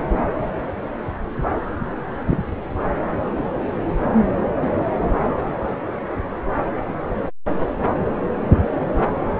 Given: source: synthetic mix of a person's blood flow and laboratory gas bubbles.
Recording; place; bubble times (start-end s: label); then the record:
Doppler ultrasound of blood flow; subclavian vein
2.29-2.39 s: bubbles
From the record:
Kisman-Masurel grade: 123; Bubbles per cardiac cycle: 1 to 2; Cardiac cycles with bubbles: 10 to 50%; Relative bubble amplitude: loud (0.450 to 0.775); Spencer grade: 2 (many but less than half of the cardiac periods contain bubble signals, singularly or in groups); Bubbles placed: anywhere in the cardiac cycle